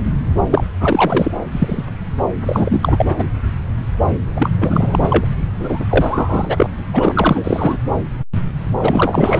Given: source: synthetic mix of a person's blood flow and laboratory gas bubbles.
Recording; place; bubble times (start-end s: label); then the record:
Doppler ultrasound of blood flow; subclavian vein
0.50-0.66 s: bubbles
0.81-1.31 s: bubbles
1.52-1.85 s: bubbles
2.46-3.24 s: bubbles
4.36-4.50 s: bubbles
4.60-5.25 s: bubbles
5.59-5.86 s: bubbles
5.90-6.69 s: bubbles
6.93-7.77 s: bubbles
8.79-9.40 s: bubbles
From the record:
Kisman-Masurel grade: 333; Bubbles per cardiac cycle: rolling drumbeat, 9 or more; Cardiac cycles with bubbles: 50 to 99%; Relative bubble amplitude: loud (0.450 to 0.775); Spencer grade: 3 (all of the cardiac periods contain showers or single bubble signals, but not dominating or overriding the cardiac motion signals); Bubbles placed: anywhere in the cardiac cycle